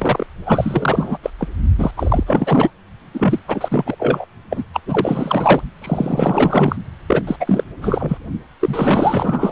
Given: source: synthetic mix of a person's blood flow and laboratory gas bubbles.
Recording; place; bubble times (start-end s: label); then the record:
Doppler ultrasound of blood flow; precordium
0.00-0.27 s: bubbles
0.46-1.18 s: bubbles
1.23-1.30 s: bubbles
1.38-1.48 s: bubbles
1.78-1.91 s: bubbles
1.96-2.23 s: bubbles
2.27-2.71 s: bubbles
3.14-3.40 s: bubbles
3.48-4.25 s: bubbles
4.50-4.64 s: bubbles
4.73-4.80 s: bubbles
4.85-5.60 s: bubbles
5.81-6.76 s: bubbles
7.07-7.23 s: bubbles
7.27-7.36 s: bubbles
7.39-7.63 s: bubbles
7.81-8.17 s: bubbles
8.61-9.52 s: bubbles
From the record:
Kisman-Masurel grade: 444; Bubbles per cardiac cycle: continuous sound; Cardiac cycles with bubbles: 100%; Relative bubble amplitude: maximal (0.775 to 0.999); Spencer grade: 4 (maximum detectable bubble signal sounding continuously throughout systole and diastole of every cardiac period, and overriding the amplitude of the normal cardiac signals); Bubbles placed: only in the low amplitude regions of the cardiac cycle